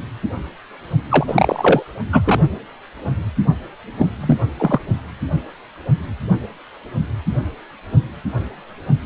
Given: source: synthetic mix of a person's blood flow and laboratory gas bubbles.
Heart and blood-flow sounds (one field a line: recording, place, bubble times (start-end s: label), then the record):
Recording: Doppler ultrasound of blood flow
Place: precordium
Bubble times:
1.09-1.82 s: bubbles
2.12-2.22 s: bubbles
2.24-2.40 s: bubbles
3.97-4.10 s: bubbles
4.21-4.38 s: bubbles
4.58-4.80 s: bubbles
From the record:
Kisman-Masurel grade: 223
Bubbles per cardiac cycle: several, 3 to 8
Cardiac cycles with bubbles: 10 to 50%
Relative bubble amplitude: loud (0.450 to 0.775)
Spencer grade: 2 (many but less than half of the cardiac periods contain bubble signals, singularly or in groups)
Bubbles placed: only in the low amplitude regions of the cardiac cycle